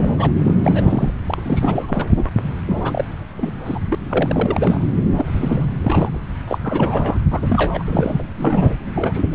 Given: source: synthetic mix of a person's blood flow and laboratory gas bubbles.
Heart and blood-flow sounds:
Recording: Doppler ultrasound of blood flow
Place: subclavian vein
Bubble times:
0.00-0.10 s: bubbles
0.17-0.31 s: bubbles
0.38-0.54 s: bubbles
0.64-1.13 s: bubbles
1.27-2.29 s: bubbles
2.66-3.04 s: bubbles
3.37-3.52 s: bubbles
3.65-3.80 s: bubbles
3.90-3.95 s: bubbles
4.09-4.87 s: bubbles
4.94-5.03 s: bubbles
5.15-5.65 s: bubbles
5.80-6.22 s: bubbles
6.47-6.58 s: bubbles
6.63-7.17 s: bubbles
7.30-8.23 s: bubbles
8.38-8.76 s: bubbles
8.84-9.22 s: bubbles
From the record:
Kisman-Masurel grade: 332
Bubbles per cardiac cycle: rolling drumbeat, 9 or more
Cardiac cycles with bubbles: 50 to 99%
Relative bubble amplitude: moderate (0.250 to 0.450)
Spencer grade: 3 (all of the cardiac periods contain showers or single bubble signals, but not dominating or overriding the cardiac motion signals)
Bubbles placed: anywhere in the cardiac cycle

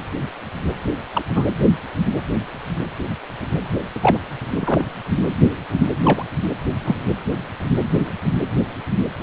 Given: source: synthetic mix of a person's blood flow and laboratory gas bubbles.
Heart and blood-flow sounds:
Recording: Doppler ultrasound of blood flow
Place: precordium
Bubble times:
1.14-1.25 s: bubbles
1.34-1.45 s: bubbles
4.00-4.18 s: bubbles
4.55-4.85 s: bubbles
6.04-6.24 s: bubbles
6.84-6.96 s: bubbles
From the record:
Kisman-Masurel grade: 122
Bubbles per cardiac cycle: 1 to 2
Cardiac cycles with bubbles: 10 to 50%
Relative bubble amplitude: moderate (0.250 to 0.450)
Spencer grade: 2 (many but less than half of the cardiac periods contain bubble signals, singularly or in groups)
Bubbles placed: anywhere in the cardiac cycle

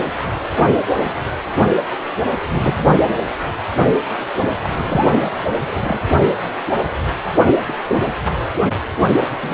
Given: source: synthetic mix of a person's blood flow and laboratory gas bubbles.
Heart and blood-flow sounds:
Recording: Doppler ultrasound of blood flow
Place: precordium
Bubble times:
0.00-0.07 s: bubbles
2.49-2.97 s: bubbles
4.63-5.22 s: bubbles
5.53-6.00 s: bubbles
7.67-7.75 s: bubbles
7.88-8.15 s: bubbles
9.42-9.54 s: bubbles
From the record:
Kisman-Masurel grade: 222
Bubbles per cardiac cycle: several, 3 to 8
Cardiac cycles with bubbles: 10 to 50%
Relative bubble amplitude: moderate (0.250 to 0.450)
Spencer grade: 2 (many but less than half of the cardiac periods contain bubble signals, singularly or in groups)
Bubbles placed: anywhere in the cardiac cycle

